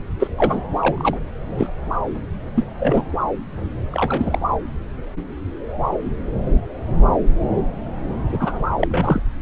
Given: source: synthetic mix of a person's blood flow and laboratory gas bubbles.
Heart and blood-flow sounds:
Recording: Doppler ultrasound of blood flow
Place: subclavian vein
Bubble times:
0.19-0.27 s: bubbles
0.37-0.60 s: bubbles
0.80-1.17 s: bubbles
1.57-1.67 s: bubbles
2.56-2.65 s: bubbles
2.79-3.05 s: bubbles
3.91-4.38 s: bubbles
8.29-8.71 s: bubbles
8.80-8.88 s: bubbles
8.91-9.22 s: bubbles
From the record:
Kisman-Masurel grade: 232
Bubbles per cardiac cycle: several, 3 to 8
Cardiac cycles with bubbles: 50 to 99%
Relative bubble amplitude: moderate (0.250 to 0.450)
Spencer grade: 3 (all of the cardiac periods contain showers or single bubble signals, but not dominating or overriding the cardiac motion signals)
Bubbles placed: anywhere in the cardiac cycle

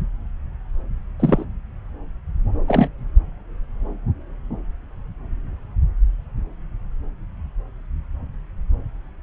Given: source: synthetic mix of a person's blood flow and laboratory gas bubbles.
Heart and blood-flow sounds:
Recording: Doppler ultrasound of blood flow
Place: subclavian vein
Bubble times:
1.19-1.44 s: bubbles
2.68-2.89 s: bubbles
From the record:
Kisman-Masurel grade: 113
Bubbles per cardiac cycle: 1 to 2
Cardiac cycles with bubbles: 1 to 10%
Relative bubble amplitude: loud (0.450 to 0.775)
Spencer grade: 1 (occasional bubble signal discernible with the cardiac motion signal, with majority of cardiac periods free of bubbles)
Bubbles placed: anywhere in the cardiac cycle

